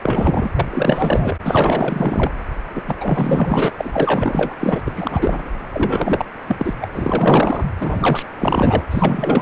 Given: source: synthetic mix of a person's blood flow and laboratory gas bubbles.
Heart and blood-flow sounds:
Doppler ultrasound of blood flow; precordium
0.00-0.48 s: bubbles
0.55-0.66 s: bubbles
0.70-1.37 s: bubbles
1.44-2.31 s: bubbles
2.75-2.82 s: bubbles
2.87-2.96 s: bubbles
3.00-3.70 s: bubbles
3.77-4.56 s: bubbles
4.61-4.82 s: bubbles
4.86-4.92 s: bubbles
4.96-5.50 s: bubbles
5.70-6.25 s: bubbles
6.48-6.74 s: bubbles
6.81-6.87 s: bubbles
6.94-7.65 s: bubbles
7.80-8.23 s: bubbles
8.39-8.83 s: bubbles
8.90-9.42 s: bubbles
From the record:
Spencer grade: 4 (maximum detectable bubble signal sounding continuously throughout systole and diastole of every cardiac period, and overriding the amplitude of the normal cardiac signals); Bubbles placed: anywhere in the cardiac cycle

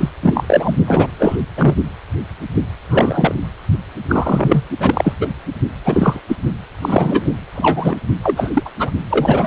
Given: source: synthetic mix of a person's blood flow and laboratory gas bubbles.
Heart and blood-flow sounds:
Doppler ultrasound of blood flow; precordium
0.00-0.09 s: bubbles
0.22-0.75 s: bubbles
0.87-1.07 s: bubbles
1.19-1.36 s: bubbles
1.56-1.75 s: bubbles
2.90-3.35 s: bubbles
4.08-4.62 s: bubbles
4.80-5.13 s: bubbles
5.20-5.28 s: bubbles
5.85-6.21 s: bubbles
6.28-6.36 s: bubbles
6.81-7.31 s: bubbles
7.54-7.97 s: bubbles
8.23-8.51 s: bubbles
8.54-8.70 s: bubbles
8.79-8.90 s: bubbles
9.09-9.47 s: bubbles
From the record:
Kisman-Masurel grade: 243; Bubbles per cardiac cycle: several, 3 to 8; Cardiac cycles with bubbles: 100%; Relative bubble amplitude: loud (0.450 to 0.775); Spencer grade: 3 (all of the cardiac periods contain showers or single bubble signals, but not dominating or overriding the cardiac motion signals); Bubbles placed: only in the low amplitude regions of the cardiac cycle

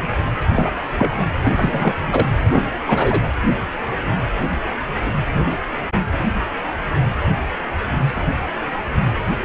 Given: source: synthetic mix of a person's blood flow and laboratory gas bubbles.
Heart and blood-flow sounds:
Doppler ultrasound of blood flow; precordium
0.54-0.73 s: bubbles
0.98-1.12 s: bubbles
1.19-1.24 s: bubbles
1.44-1.51 s: bubbles
1.57-1.93 s: bubbles
2.11-2.28 s: bubbles
2.51-2.62 s: bubbles
2.85-3.21 s: bubbles
9.41-9.45 s: bubbles
From the record:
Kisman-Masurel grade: 222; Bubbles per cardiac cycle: several, 3 to 8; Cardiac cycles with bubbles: 10 to 50%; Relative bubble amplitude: moderate (0.250 to 0.450); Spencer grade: 2 (many but less than half of the cardiac periods contain bubble signals, singularly or in groups); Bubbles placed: anywhere in the cardiac cycle

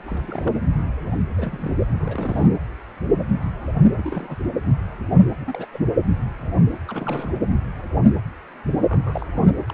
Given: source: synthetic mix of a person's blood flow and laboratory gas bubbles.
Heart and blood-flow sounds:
Doppler ultrasound of blood flow; precordium
0.05-0.62 s: bubbles
1.37-1.77 s: bubbles
1.99-2.48 s: bubbles
3.97-4.36 s: bubbles
5.40-5.67 s: bubbles
5.72-5.92 s: bubbles
6.87-7.39 s: bubbles
8.88-9.26 s: bubbles
9.34-9.48 s: bubbles
9.68-9.73 s: bubbles
From the record:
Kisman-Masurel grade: 221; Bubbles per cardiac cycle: several, 3 to 8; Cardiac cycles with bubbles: 10 to 50%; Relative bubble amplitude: barely perceptible (0.100 to 0.250); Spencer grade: 2 (many but less than half of the cardiac periods contain bubble signals, singularly or in groups); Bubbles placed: anywhere in the cardiac cycle

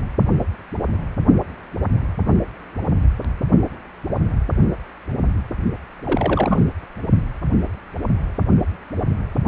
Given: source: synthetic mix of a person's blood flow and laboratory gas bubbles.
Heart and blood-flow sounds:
Doppler ultrasound of blood flow; precordium
6.04-6.66 s: bubbles
From the record:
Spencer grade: 1 (occasional bubble signal discernible with the cardiac motion signal, with majority of cardiac periods free of bubbles); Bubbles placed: only in the low amplitude regions of the cardiac cycle

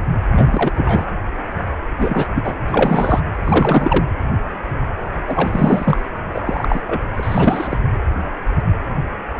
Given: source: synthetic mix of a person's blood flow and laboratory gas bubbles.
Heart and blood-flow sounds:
Doppler ultrasound of blood flow; precordium
0.35-1.06 s: bubbles
1.99-2.28 s: bubbles
2.35-2.55 s: bubbles
2.67-3.20 s: bubbles
3.34-4.04 s: bubbles
5.26-6.02 s: bubbles
6.33-6.81 s: bubbles
6.86-7.02 s: bubbles
7.12-7.79 s: bubbles
From the record:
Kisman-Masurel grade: 333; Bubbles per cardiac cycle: rolling drumbeat, 9 or more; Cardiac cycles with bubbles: 50 to 99%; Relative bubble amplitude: loud (0.450 to 0.775); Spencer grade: 3 (all of the cardiac periods contain showers or single bubble signals, but not dominating or overriding the cardiac motion signals); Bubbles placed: anywhere in the cardiac cycle

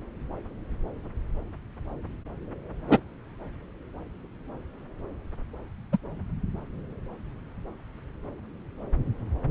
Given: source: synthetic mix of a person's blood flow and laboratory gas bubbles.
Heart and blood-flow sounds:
Doppler ultrasound of blood flow; subclavian vein
2.88-3.00 s: bubbles
5.92-5.97 s: bubbles
From the record:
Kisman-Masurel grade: 122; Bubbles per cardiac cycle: 1 to 2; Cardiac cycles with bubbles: 10 to 50%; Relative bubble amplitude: moderate (0.250 to 0.450); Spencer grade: 2 (many but less than half of the cardiac periods contain bubble signals, singularly or in groups); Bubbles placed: anywhere in the cardiac cycle

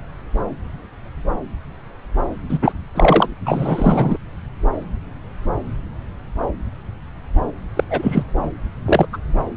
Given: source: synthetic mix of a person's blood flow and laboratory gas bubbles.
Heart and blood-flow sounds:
Doppler ultrasound of blood flow; subclavian vein
2.49-2.58 s: bubbles
2.61-2.72 s: bubbles
2.94-3.28 s: bubbles
3.45-4.17 s: bubbles
7.75-7.83 s: bubbles
7.90-8.23 s: bubbles
8.85-9.06 s: bubbles
9.13-9.17 s: bubbles
From the record:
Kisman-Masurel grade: 233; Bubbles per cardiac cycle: several, 3 to 8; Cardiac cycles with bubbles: 50 to 99%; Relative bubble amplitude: loud (0.450 to 0.775); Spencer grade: 3 (all of the cardiac periods contain showers or single bubble signals, but not dominating or overriding the cardiac motion signals); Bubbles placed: anywhere in the cardiac cycle

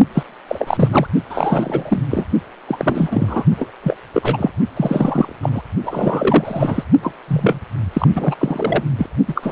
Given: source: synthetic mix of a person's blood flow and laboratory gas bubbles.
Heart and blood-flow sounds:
Doppler ultrasound of blood flow; precordium
0.14-0.23 s: bubbles
0.48-1.07 s: bubbles
1.30-2.03 s: bubbles
2.11-2.25 s: bubbles
2.67-3.45 s: bubbles
3.57-3.67 s: bubbles
3.83-3.96 s: bubbles
4.13-4.50 s: bubbles
4.76-5.35 s: bubbles
5.42-5.62 s: bubbles
5.83-6.84 s: bubbles
7.02-7.14 s: bubbles
7.27-7.59 s: bubbles
7.93-8.08 s: bubbles
8.15-8.35 s: bubbles
8.38-8.84 s: bubbles
8.98-9.07 s: bubbles
9.28-9.51 s: bubbles
From the record:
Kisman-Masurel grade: 343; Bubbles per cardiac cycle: rolling drumbeat, 9 or more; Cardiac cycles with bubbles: 100%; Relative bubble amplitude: loud (0.450 to 0.775); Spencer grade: 3 (all of the cardiac periods contain showers or single bubble signals, but not dominating or overriding the cardiac motion signals); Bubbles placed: only in the low amplitude regions of the cardiac cycle

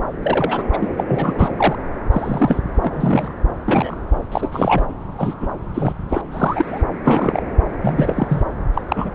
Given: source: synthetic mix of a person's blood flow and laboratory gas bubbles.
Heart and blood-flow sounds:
Doppler ultrasound of blood flow; subclavian vein
0.23-0.64 s: bubbles
0.73-0.78 s: bubbles
0.81-0.89 s: bubbles
0.98-1.04 s: bubbles
1.08-1.33 s: bubbles
1.38-1.50 s: bubbles
1.57-1.76 s: bubbles
2.11-2.60 s: bubbles
2.81-3.32 s: bubbles
3.66-3.97 s: bubbles
4.31-4.50 s: bubbles
4.52-4.84 s: bubbles
5.18-5.34 s: bubbles
5.40-5.46 s: bubbles
5.74-5.92 s: bubbles
6.09-6.21 s: bubbles
6.31-6.82 s: bubbles
7.04-7.42 s: bubbles
7.80-8.42 s: bubbles
8.73-8.81 s: bubbles
8.88-9.10 s: bubbles
From the record:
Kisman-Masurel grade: 242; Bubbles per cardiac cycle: several, 3 to 8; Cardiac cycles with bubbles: 100%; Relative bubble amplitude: moderate (0.250 to 0.450); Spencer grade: 3 (all of the cardiac periods contain showers or single bubble signals, but not dominating or overriding the cardiac motion signals); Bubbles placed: anywhere in the cardiac cycle

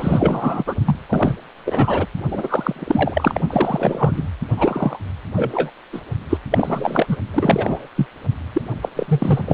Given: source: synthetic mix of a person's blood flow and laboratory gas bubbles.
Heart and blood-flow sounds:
Doppler ultrasound of blood flow; precordium
0.00-0.64 s: bubbles
0.67-0.75 s: bubbles
0.85-0.96 s: bubbles
1.09-1.36 s: bubbles
1.65-2.06 s: bubbles
2.31-3.40 s: bubbles
3.47-4.29 s: bubbles
4.57-5.00 s: bubbles
5.36-5.71 s: bubbles
5.92-6.02 s: bubbles
6.30-6.38 s: bubbles
6.50-7.17 s: bubbles
7.33-7.87 s: bubbles
7.96-8.06 s: bubbles
8.53-8.62 s: bubbles
8.81-8.89 s: bubbles
8.96-9.54 s: bubbles
From the record:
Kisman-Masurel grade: 343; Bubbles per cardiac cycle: rolling drumbeat, 9 or more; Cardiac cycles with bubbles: 100%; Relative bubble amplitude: loud (0.450 to 0.775); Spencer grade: 3 (all of the cardiac periods contain showers or single bubble signals, but not dominating or overriding the cardiac motion signals); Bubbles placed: only in the low amplitude regions of the cardiac cycle

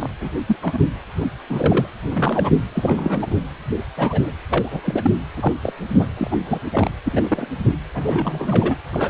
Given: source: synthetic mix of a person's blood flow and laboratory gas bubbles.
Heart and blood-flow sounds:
Doppler ultrasound of blood flow; precordium
0.00-0.08 s: bubbles
0.21-0.30 s: bubbles
0.47-0.56 s: bubbles
0.61-0.78 s: bubbles
1.20-1.26 s: bubbles
1.49-1.86 s: bubbles
2.11-2.50 s: bubbles
2.75-3.36 s: bubbles
3.96-4.31 s: bubbles
4.50-4.68 s: bubbles
4.71-4.81 s: bubbles
4.84-5.12 s: bubbles
5.36-5.53 s: bubbles
5.62-5.73 s: bubbles
5.99-6.07 s: bubbles
6.17-6.37 s: bubbles
6.46-6.61 s: bubbles
6.72-6.92 s: bubbles
7.04-7.48 s: bubbles
7.94-8.76 s: bubbles
8.91-9.10 s: bubbles
From the record:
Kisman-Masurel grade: 243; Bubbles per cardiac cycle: several, 3 to 8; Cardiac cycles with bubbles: 100%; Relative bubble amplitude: loud (0.450 to 0.775); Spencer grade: 3 (all of the cardiac periods contain showers or single bubble signals, but not dominating or overriding the cardiac motion signals); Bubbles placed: anywhere in the cardiac cycle

